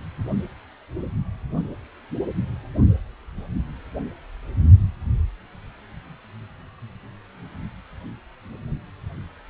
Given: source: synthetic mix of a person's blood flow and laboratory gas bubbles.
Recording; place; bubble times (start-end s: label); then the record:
Doppler ultrasound of blood flow; precordium
no bubbles
From the record:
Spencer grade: 0 (complete lack of bubble signals)